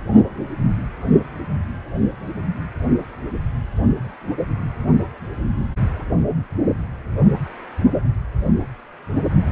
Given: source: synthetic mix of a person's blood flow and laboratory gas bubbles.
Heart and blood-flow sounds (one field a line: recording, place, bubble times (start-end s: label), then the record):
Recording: Doppler ultrasound of blood flow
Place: precordium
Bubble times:
no bubbles
From the record:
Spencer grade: 0 (complete lack of bubble signals)